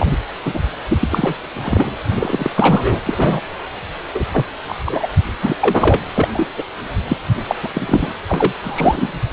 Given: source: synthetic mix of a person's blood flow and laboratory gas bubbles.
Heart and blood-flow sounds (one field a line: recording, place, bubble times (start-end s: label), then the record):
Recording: Doppler ultrasound of blood flow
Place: precordium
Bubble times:
0.00-0.17 s: bubbles
0.45-0.60 s: bubbles
0.88-1.34 s: bubbles
1.54-1.91 s: bubbles
2.15-2.50 s: bubbles
2.54-3.00 s: bubbles
3.04-3.41 s: bubbles
4.15-4.24 s: bubbles
4.33-4.46 s: bubbles
4.68-4.78 s: bubbles
4.85-5.07 s: bubbles
5.41-5.56 s: bubbles
5.61-6.00 s: bubbles
6.14-6.28 s: bubbles
6.34-6.47 s: bubbles
6.58-6.63 s: bubbles
7.08-7.17 s: bubbles
7.48-7.55 s: bubbles
7.62-7.69 s: bubbles
7.73-8.12 s: bubbles
8.29-8.53 s: bubbles
8.63-9.21 s: bubbles
From the record:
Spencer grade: 3 (all of the cardiac periods contain showers or single bubble signals, but not dominating or overriding the cardiac motion signals)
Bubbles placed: anywhere in the cardiac cycle